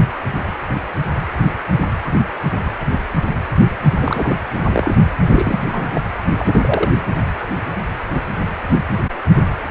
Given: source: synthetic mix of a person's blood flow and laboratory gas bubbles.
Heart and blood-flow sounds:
Doppler ultrasound of blood flow; precordium
4.01-4.36 s: bubbles
4.54-4.63 s: bubbles
4.72-4.95 s: bubbles
5.25-5.62 s: bubbles
5.67-5.91 s: bubbles
5.94-6.03 s: bubbles
6.38-6.92 s: bubbles
From the record:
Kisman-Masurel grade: 222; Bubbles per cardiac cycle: several, 3 to 8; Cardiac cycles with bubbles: 10 to 50%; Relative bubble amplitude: moderate (0.250 to 0.450); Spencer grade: 2 (many but less than half of the cardiac periods contain bubble signals, singularly or in groups); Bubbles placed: anywhere in the cardiac cycle

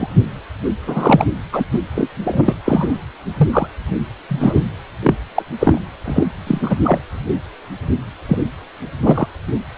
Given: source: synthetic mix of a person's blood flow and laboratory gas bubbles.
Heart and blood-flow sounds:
Doppler ultrasound of blood flow; precordium
0.00-0.08 s: bubbles
0.86-1.27 s: bubbles
1.52-1.65 s: bubbles
1.72-1.79 s: bubbles
1.95-2.08 s: bubbles
2.23-2.54 s: bubbles
2.65-3.04 s: bubbles
3.37-3.48 s: bubbles
3.52-3.67 s: bubbles
4.28-4.72 s: bubbles
5.03-5.14 s: bubbles
5.35-5.42 s: bubbles
5.60-5.79 s: bubbles
6.04-6.26 s: bubbles
6.46-6.76 s: bubbles
6.83-7.00 s: bubbles
8.28-8.38 s: bubbles
9.03-9.27 s: bubbles
From the record:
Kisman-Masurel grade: 233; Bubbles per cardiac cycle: several, 3 to 8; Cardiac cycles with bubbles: 50 to 99%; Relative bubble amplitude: loud (0.450 to 0.775); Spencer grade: 3 (all of the cardiac periods contain showers or single bubble signals, but not dominating or overriding the cardiac motion signals); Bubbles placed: anywhere in the cardiac cycle

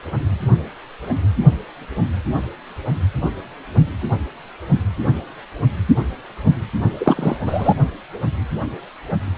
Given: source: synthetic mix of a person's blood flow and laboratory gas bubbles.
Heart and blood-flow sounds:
Doppler ultrasound of blood flow; precordium
7.00-7.37 s: bubbles
7.46-7.74 s: bubbles
From the record:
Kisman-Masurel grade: 213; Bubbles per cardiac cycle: several, 3 to 8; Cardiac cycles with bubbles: 1 to 10%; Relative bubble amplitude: loud (0.450 to 0.775); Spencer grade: 1 (occasional bubble signal discernible with the cardiac motion signal, with majority of cardiac periods free of bubbles); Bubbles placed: only in the low amplitude regions of the cardiac cycle

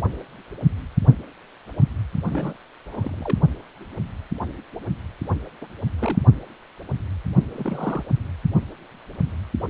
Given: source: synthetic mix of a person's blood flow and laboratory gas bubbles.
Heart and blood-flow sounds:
Doppler ultrasound of blood flow; precordium
2.23-2.53 s: bubbles
2.87-3.39 s: bubbles
5.62-5.67 s: bubbles
5.99-6.19 s: bubbles
7.54-8.03 s: bubbles
From the record:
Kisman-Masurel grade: 221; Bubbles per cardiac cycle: several, 3 to 8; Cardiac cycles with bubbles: 10 to 50%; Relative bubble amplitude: barely perceptible (0.100 to 0.250); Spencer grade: 2 (many but less than half of the cardiac periods contain bubble signals, singularly or in groups); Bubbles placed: only in the low amplitude regions of the cardiac cycle

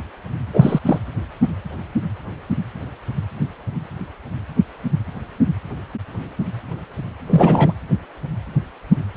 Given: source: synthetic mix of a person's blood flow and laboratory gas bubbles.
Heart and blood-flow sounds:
Doppler ultrasound of blood flow; precordium
0.53-0.80 s: bubbles
0.85-0.98 s: bubbles
7.29-7.73 s: bubbles
From the record:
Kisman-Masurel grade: 213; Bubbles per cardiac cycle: several, 3 to 8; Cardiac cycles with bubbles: 1 to 10%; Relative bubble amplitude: loud (0.450 to 0.775); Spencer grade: 1 (occasional bubble signal discernible with the cardiac motion signal, with majority of cardiac periods free of bubbles); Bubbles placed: anywhere in the cardiac cycle

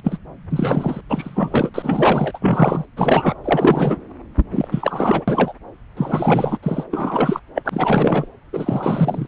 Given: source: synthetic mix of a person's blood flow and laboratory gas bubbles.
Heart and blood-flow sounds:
Doppler ultrasound of blood flow; subclavian vein
0.04-0.18 s: bubbles
0.49-1.01 s: bubbles
1.09-1.70 s: bubbles
1.74-2.85 s: bubbles
2.96-3.34 s: bubbles
3.44-3.97 s: bubbles
4.51-4.68 s: bubbles
4.71-5.23 s: bubbles
5.27-5.54 s: bubbles
5.96-6.58 s: bubbles
6.62-6.84 s: bubbles
6.91-7.40 s: bubbles
7.55-8.26 s: bubbles
8.53-9.28 s: bubbles
From the record:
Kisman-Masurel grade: 343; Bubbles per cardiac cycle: rolling drumbeat, 9 or more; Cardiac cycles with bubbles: 100%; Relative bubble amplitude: loud (0.450 to 0.775); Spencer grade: 3 (all of the cardiac periods contain showers or single bubble signals, but not dominating or overriding the cardiac motion signals); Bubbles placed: anywhere in the cardiac cycle

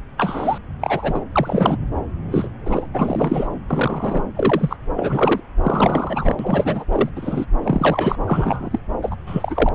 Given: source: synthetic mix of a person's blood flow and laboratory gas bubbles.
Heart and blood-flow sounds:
Doppler ultrasound of blood flow; subclavian vein
0.17-0.58 s: bubbles
0.81-1.23 s: bubbles
1.35-1.79 s: bubbles
2.31-2.49 s: bubbles
2.65-2.89 s: bubbles
2.94-3.47 s: bubbles
3.67-4.21 s: bubbles
4.35-4.76 s: bubbles
4.96-5.40 s: bubbles
5.62-6.36 s: bubbles
6.39-6.84 s: bubbles
6.91-7.09 s: bubbles
7.15-7.46 s: bubbles
7.62-8.15 s: bubbles
8.27-8.79 s: bubbles
9.02-9.15 s: bubbles
9.27-9.69 s: bubbles
From the record:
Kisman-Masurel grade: 243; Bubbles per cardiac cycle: several, 3 to 8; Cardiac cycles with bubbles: 100%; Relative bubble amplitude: loud (0.450 to 0.775); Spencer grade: 3 (all of the cardiac periods contain showers or single bubble signals, but not dominating or overriding the cardiac motion signals); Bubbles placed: anywhere in the cardiac cycle

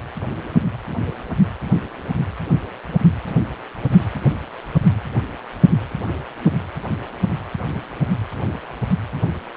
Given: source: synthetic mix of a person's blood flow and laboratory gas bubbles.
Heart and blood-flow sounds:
Doppler ultrasound of blood flow; precordium
no bubbles
From the record:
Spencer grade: 0 (complete lack of bubble signals)

